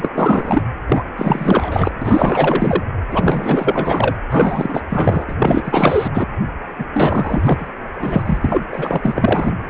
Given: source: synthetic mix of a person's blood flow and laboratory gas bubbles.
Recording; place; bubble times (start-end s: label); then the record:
Doppler ultrasound of blood flow; precordium
0.00-0.11 s: bubbles
0.14-0.62 s: bubbles
0.88-1.03 s: bubbles
1.17-1.92 s: bubbles
2.02-2.83 s: bubbles
3.11-4.17 s: bubbles
4.30-4.83 s: bubbles
4.89-5.36 s: bubbles
5.38-6.10 s: bubbles
6.13-6.25 s: bubbles
6.79-6.84 s: bubbles
6.93-7.67 s: bubbles
7.99-8.22 s: bubbles
8.26-8.38 s: bubbles
8.40-8.65 s: bubbles
8.73-9.52 s: bubbles
From the record:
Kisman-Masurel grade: 444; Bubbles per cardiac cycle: continuous sound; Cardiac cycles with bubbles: 100%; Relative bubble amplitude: maximal (0.775 to 0.999); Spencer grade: 4 (maximum detectable bubble signal sounding continuously throughout systole and diastole of every cardiac period, and overriding the amplitude of the normal cardiac signals); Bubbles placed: anywhere in the cardiac cycle